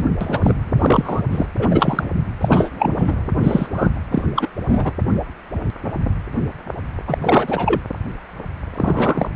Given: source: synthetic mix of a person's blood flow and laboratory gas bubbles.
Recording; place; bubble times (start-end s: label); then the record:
Doppler ultrasound of blood flow; precordium
0.00-0.05 s: bubbles
0.20-0.53 s: bubbles
0.79-1.22 s: bubbles
1.31-1.46 s: bubbles
1.57-2.04 s: bubbles
2.40-2.69 s: bubbles
2.79-2.94 s: bubbles
2.98-3.15 s: bubbles
3.38-3.67 s: bubbles
3.73-3.88 s: bubbles
4.10-4.23 s: bubbles
4.35-4.48 s: bubbles
4.67-4.91 s: bubbles
7.07-7.18 s: bubbles
7.21-7.80 s: bubbles
8.75-9.29 s: bubbles
From the record:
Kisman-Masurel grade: 233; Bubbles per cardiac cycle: several, 3 to 8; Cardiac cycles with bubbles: 50 to 99%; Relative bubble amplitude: loud (0.450 to 0.775); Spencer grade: 3 (all of the cardiac periods contain showers or single bubble signals, but not dominating or overriding the cardiac motion signals); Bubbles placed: anywhere in the cardiac cycle